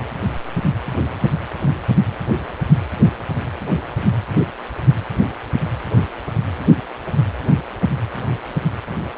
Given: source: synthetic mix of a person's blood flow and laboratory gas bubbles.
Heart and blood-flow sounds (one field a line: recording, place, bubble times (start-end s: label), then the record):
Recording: Doppler ultrasound of blood flow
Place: precordium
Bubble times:
no bubbles
From the record:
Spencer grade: 0 (complete lack of bubble signals)